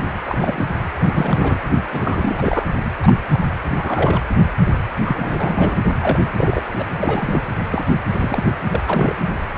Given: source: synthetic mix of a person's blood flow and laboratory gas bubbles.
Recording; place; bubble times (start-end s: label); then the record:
Doppler ultrasound of blood flow; precordium
0.00-0.04 s: bubbles
0.25-0.67 s: bubbles
0.99-1.58 s: bubbles
1.92-2.66 s: bubbles
3.02-3.19 s: bubbles
3.33-3.38 s: bubbles
3.75-4.22 s: bubbles
5.04-5.80 s: bubbles
6.01-6.25 s: bubbles
6.37-6.63 s: bubbles
6.78-6.84 s: bubbles
7.00-7.42 s: bubbles
7.71-7.84 s: bubbles
8.12-8.54 s: bubbles
8.72-8.83 s: bubbles
8.86-9.16 s: bubbles
From the record:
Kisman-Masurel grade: 242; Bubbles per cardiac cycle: several, 3 to 8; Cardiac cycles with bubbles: 100%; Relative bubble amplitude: moderate (0.250 to 0.450); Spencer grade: 3 (all of the cardiac periods contain showers or single bubble signals, but not dominating or overriding the cardiac motion signals); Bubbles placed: anywhere in the cardiac cycle